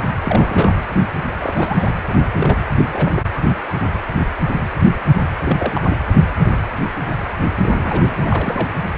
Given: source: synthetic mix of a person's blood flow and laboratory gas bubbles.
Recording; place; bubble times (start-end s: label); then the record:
Doppler ultrasound of blood flow; precordium
0.24-0.76 s: bubbles
1.41-1.92 s: bubbles
2.07-2.30 s: bubbles
2.34-2.58 s: bubbles
2.77-2.85 s: bubbles
2.92-3.22 s: bubbles
5.43-5.81 s: bubbles
5.84-5.96 s: bubbles
7.62-8.15 s: bubbles
8.20-8.69 s: bubbles
From the record:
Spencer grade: 2 (many but less than half of the cardiac periods contain bubble signals, singularly or in groups); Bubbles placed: anywhere in the cardiac cycle